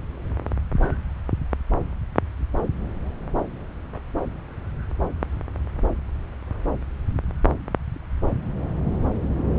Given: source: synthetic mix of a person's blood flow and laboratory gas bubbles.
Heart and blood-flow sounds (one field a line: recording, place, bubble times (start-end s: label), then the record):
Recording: Doppler ultrasound of blood flow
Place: subclavian vein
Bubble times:
no bubbles
From the record:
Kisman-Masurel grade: 000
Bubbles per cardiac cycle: 0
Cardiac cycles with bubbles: 0%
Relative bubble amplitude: no bubbles discernible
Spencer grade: 0 (complete lack of bubble signals)